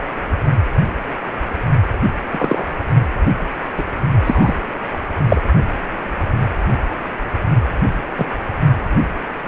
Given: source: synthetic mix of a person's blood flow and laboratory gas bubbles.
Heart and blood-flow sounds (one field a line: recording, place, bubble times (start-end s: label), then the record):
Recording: Doppler ultrasound of blood flow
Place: precordium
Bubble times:
2.31-2.65 s: bubbles
3.78-3.84 s: bubbles
4.25-4.54 s: bubbles
5.29-5.42 s: bubbles
8.18-8.26 s: bubbles
From the record:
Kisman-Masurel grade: 123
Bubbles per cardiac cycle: 1 to 2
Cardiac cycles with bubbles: 10 to 50%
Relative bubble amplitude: loud (0.450 to 0.775)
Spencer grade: 2 (many but less than half of the cardiac periods contain bubble signals, singularly or in groups)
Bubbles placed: only in the low amplitude regions of the cardiac cycle